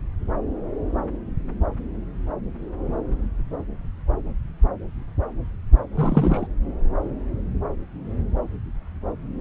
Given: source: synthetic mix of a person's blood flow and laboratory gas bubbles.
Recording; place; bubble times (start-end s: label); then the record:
Doppler ultrasound of blood flow; subclavian vein
5.94-6.47 s: bubbles
From the record:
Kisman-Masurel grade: 212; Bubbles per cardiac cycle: several, 3 to 8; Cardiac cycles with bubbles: 1 to 10%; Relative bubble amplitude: moderate (0.250 to 0.450); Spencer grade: 1 (occasional bubble signal discernible with the cardiac motion signal, with majority of cardiac periods free of bubbles); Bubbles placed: anywhere in the cardiac cycle